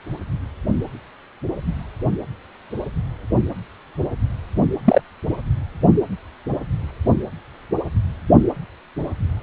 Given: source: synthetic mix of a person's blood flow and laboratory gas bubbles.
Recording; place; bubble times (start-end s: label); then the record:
Doppler ultrasound of blood flow; precordium
4.84-5.01 s: bubbles
From the record:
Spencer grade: 1 (occasional bubble signal discernible with the cardiac motion signal, with majority of cardiac periods free of bubbles); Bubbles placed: anywhere in the cardiac cycle